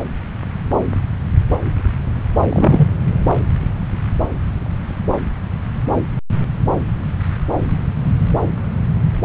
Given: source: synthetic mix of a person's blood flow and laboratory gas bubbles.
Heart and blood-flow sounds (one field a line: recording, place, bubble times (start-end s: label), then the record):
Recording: Doppler ultrasound of blood flow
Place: subclavian vein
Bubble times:
2.50-2.87 s: bubbles
From the record:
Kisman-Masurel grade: 213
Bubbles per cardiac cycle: several, 3 to 8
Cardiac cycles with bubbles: 1 to 10%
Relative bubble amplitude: loud (0.450 to 0.775)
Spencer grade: 1 (occasional bubble signal discernible with the cardiac motion signal, with majority of cardiac periods free of bubbles)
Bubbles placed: anywhere in the cardiac cycle